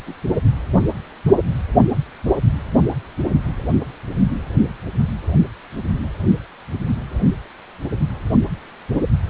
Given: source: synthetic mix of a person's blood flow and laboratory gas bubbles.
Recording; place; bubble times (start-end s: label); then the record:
Doppler ultrasound of blood flow; precordium
0.06-0.14 s: bubbles
From the record:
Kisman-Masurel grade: 121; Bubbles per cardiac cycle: 1 to 2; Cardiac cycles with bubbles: 10 to 50%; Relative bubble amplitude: barely perceptible (0.100 to 0.250); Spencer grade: 2 (many but less than half of the cardiac periods contain bubble signals, singularly or in groups); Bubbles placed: anywhere in the cardiac cycle